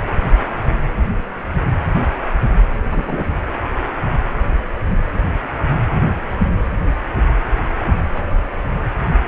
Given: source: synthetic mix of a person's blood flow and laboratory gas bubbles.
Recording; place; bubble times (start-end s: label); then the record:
Doppler ultrasound of blood flow; precordium
2.91-3.24 s: bubbles
From the record:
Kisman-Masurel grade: 112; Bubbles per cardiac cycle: 1 to 2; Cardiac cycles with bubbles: 1 to 10%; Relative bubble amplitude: moderate (0.250 to 0.450); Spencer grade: 1 (occasional bubble signal discernible with the cardiac motion signal, with majority of cardiac periods free of bubbles); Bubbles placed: anywhere in the cardiac cycle